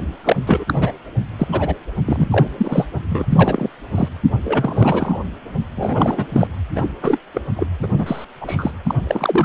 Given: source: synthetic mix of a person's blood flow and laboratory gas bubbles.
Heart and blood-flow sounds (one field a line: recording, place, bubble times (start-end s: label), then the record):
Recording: Doppler ultrasound of blood flow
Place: precordium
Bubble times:
0.24-0.36 s: bubbles
0.46-0.64 s: bubbles
0.67-0.92 s: bubbles
1.38-1.48 s: bubbles
1.52-1.75 s: bubbles
2.05-2.48 s: bubbles
2.58-2.85 s: bubbles
3.10-3.26 s: bubbles
3.30-3.69 s: bubbles
3.94-4.08 s: bubbles
4.44-5.17 s: bubbles
5.75-6.27 s: bubbles
6.31-6.47 s: bubbles
6.75-6.87 s: bubbles
7.02-7.19 s: bubbles
7.34-7.42 s: bubbles
7.56-7.67 s: bubbles
7.82-7.88 s: bubbles
7.93-8.25 s: bubbles
8.41-8.71 s: bubbles
8.83-8.95 s: bubbles
9.07-9.45 s: bubbles
From the record:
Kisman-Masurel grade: 243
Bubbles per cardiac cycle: several, 3 to 8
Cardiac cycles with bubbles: 100%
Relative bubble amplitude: loud (0.450 to 0.775)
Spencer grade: 3 (all of the cardiac periods contain showers or single bubble signals, but not dominating or overriding the cardiac motion signals)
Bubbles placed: anywhere in the cardiac cycle